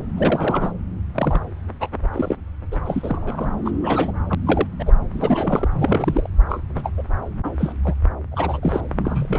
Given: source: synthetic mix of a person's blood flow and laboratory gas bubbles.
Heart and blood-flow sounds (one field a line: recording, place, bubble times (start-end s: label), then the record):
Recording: Doppler ultrasound of blood flow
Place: subclavian vein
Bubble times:
0.17-0.72 s: bubbles
1.15-1.41 s: bubbles
1.80-1.88 s: bubbles
2.12-2.36 s: bubbles
2.71-2.77 s: bubbles
2.85-3.49 s: bubbles
3.64-3.71 s: bubbles
3.81-4.12 s: bubbles
4.29-4.35 s: bubbles
4.46-4.67 s: bubbles
4.79-4.92 s: bubbles
5.10-5.68 s: bubbles
5.72-6.28 s: bubbles
6.50-6.59 s: bubbles
6.75-6.91 s: bubbles
6.97-7.03 s: bubbles
7.44-7.51 s: bubbles
7.58-7.73 s: bubbles
7.84-7.94 s: bubbles
8.31-8.80 s: bubbles
9.04-9.39 s: bubbles
From the record:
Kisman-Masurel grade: 232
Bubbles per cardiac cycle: several, 3 to 8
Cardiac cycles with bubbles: 50 to 99%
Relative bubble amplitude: moderate (0.250 to 0.450)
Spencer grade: 3 (all of the cardiac periods contain showers or single bubble signals, but not dominating or overriding the cardiac motion signals)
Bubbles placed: anywhere in the cardiac cycle